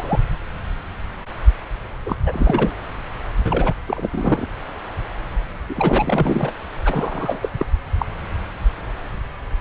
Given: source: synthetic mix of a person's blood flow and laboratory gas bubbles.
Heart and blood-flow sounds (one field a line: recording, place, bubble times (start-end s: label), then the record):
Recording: Doppler ultrasound of blood flow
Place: subclavian vein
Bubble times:
0.00-0.20 s: bubbles
2.05-2.15 s: bubbles
2.25-2.73 s: bubbles
3.44-3.73 s: bubbles
3.87-4.49 s: bubbles
5.69-6.53 s: bubbles
6.85-7.50 s: bubbles
7.58-7.66 s: bubbles
7.99-8.05 s: bubbles
From the record:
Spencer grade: 3 (all of the cardiac periods contain showers or single bubble signals, but not dominating or overriding the cardiac motion signals)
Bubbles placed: anywhere in the cardiac cycle